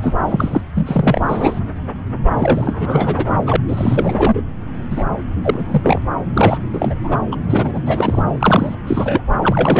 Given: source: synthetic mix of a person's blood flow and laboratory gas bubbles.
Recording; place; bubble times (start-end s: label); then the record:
Doppler ultrasound of blood flow; subclavian vein
0.01-0.15 s: bubbles
0.28-0.61 s: bubbles
0.76-1.60 s: bubbles
2.37-3.27 s: bubbles
3.37-3.56 s: bubbles
3.67-4.41 s: bubbles
4.91-5.04 s: bubbles
5.43-6.00 s: bubbles
6.33-6.58 s: bubbles
6.73-6.95 s: bubbles
7.04-7.18 s: bubbles
7.31-7.37 s: bubbles
7.46-7.82 s: bubbles
7.86-8.22 s: bubbles
8.40-8.75 s: bubbles
8.87-9.21 s: bubbles
9.41-9.80 s: bubbles
From the record:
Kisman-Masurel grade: 343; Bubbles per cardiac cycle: rolling drumbeat, 9 or more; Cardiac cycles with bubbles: 100%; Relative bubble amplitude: loud (0.450 to 0.775); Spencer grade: 3 (all of the cardiac periods contain showers or single bubble signals, but not dominating or overriding the cardiac motion signals); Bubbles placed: anywhere in the cardiac cycle